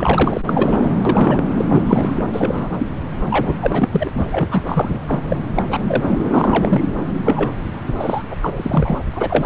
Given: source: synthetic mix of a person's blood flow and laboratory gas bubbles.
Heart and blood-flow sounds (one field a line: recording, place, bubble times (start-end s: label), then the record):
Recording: Doppler ultrasound of blood flow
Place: subclavian vein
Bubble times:
0.00-0.41 s: bubbles
0.46-0.93 s: bubbles
1.05-1.46 s: bubbles
1.57-1.65 s: bubbles
1.68-1.83 s: bubbles
1.85-2.31 s: bubbles
2.33-2.70 s: bubbles
2.78-2.87 s: bubbles
3.30-3.54 s: bubbles
3.60-3.89 s: bubbles
3.92-4.10 s: bubbles
4.13-4.63 s: bubbles
4.67-5.21 s: bubbles
5.29-5.36 s: bubbles
5.55-5.63 s: bubbles
5.69-6.18 s: bubbles
6.30-6.87 s: bubbles
7.25-7.51 s: bubbles
7.99-8.22 s: bubbles
8.30-8.36 s: bubbles
8.41-9.00 s: bubbles
9.12-9.46 s: bubbles
From the record:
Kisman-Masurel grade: 343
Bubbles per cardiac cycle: rolling drumbeat, 9 or more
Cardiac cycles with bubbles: 100%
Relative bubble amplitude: loud (0.450 to 0.775)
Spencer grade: 3 (all of the cardiac periods contain showers or single bubble signals, but not dominating or overriding the cardiac motion signals)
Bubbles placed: anywhere in the cardiac cycle